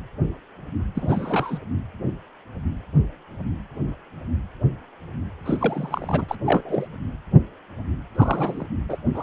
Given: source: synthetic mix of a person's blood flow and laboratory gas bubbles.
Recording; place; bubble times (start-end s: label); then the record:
Doppler ultrasound of blood flow; precordium
0.95-1.58 s: bubbles
5.45-6.25 s: bubbles
6.29-6.36 s: bubbles
6.46-6.87 s: bubbles
8.15-8.67 s: bubbles
8.88-8.96 s: bubbles
9.14-9.23 s: bubbles
From the record:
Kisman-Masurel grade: 232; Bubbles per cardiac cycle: several, 3 to 8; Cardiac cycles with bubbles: 50 to 99%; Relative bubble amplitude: moderate (0.250 to 0.450); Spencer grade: 3 (all of the cardiac periods contain showers or single bubble signals, but not dominating or overriding the cardiac motion signals); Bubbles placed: anywhere in the cardiac cycle